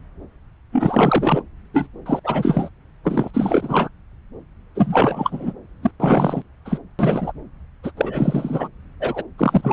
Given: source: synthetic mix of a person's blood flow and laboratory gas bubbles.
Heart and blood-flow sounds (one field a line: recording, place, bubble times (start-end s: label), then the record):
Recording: Doppler ultrasound of blood flow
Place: subclavian vein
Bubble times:
0.73-1.42 s: bubbles
1.73-1.88 s: bubbles
2.06-2.20 s: bubbles
2.24-2.69 s: bubbles
3.04-3.31 s: bubbles
3.33-3.89 s: bubbles
4.75-5.53 s: bubbles
5.82-5.91 s: bubbles
6.00-6.42 s: bubbles
6.65-6.78 s: bubbles
6.99-7.32 s: bubbles
7.83-7.91 s: bubbles
7.97-8.68 s: bubbles
9.00-9.23 s: bubbles
9.38-9.72 s: bubbles
From the record:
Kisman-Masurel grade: 333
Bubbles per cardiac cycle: rolling drumbeat, 9 or more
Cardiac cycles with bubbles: 50 to 99%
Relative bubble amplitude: loud (0.450 to 0.775)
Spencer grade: 3 (all of the cardiac periods contain showers or single bubble signals, but not dominating or overriding the cardiac motion signals)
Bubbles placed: anywhere in the cardiac cycle